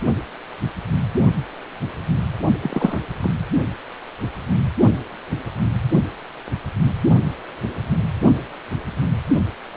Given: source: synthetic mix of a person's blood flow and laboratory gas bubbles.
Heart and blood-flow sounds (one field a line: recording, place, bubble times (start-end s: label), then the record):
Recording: Doppler ultrasound of blood flow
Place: precordium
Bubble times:
2.62-3.00 s: bubbles
3.22-3.29 s: bubbles
From the record:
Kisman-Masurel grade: 212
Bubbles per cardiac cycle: several, 3 to 8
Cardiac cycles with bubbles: 1 to 10%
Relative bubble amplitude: moderate (0.250 to 0.450)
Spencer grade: 1 (occasional bubble signal discernible with the cardiac motion signal, with majority of cardiac periods free of bubbles)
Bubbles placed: only in the low amplitude regions of the cardiac cycle